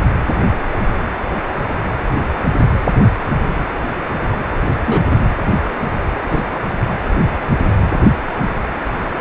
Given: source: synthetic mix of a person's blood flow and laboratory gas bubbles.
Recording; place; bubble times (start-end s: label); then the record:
Doppler ultrasound of blood flow; precordium
4.86-5.02 s: bubbles
5.11-5.17 s: bubbles
6.29-6.43 s: bubbles
From the record:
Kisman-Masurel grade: 123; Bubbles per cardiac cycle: 1 to 2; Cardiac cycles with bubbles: 10 to 50%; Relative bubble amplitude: loud (0.450 to 0.775); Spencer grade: 2 (many but less than half of the cardiac periods contain bubble signals, singularly or in groups); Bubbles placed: anywhere in the cardiac cycle